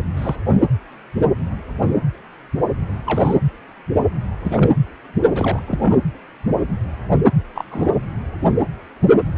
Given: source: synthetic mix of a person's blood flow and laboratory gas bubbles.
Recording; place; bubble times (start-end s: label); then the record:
Doppler ultrasound of blood flow; precordium
0.16-0.43 s: bubbles
3.04-3.35 s: bubbles
4.44-4.72 s: bubbles
5.34-5.60 s: bubbles
5.67-5.98 s: bubbles
7.54-7.64 s: bubbles
7.71-7.89 s: bubbles
From the record:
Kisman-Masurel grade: 221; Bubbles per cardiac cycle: several, 3 to 8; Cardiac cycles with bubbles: 10 to 50%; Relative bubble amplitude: barely perceptible (0.100 to 0.250); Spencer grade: 2 (many but less than half of the cardiac periods contain bubble signals, singularly or in groups); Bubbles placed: anywhere in the cardiac cycle